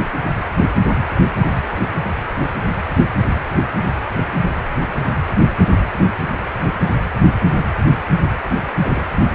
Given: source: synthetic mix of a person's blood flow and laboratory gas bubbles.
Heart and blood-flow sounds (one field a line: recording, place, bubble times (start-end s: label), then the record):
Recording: Doppler ultrasound of blood flow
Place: precordium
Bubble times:
8.50-8.55 s: bubbles
8.84-9.02 s: bubbles
From the record:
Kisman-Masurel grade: 211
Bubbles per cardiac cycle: several, 3 to 8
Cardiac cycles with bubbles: 1 to 10%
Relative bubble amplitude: barely perceptible (0.100 to 0.250)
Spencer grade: 1 (occasional bubble signal discernible with the cardiac motion signal, with majority of cardiac periods free of bubbles)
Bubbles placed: anywhere in the cardiac cycle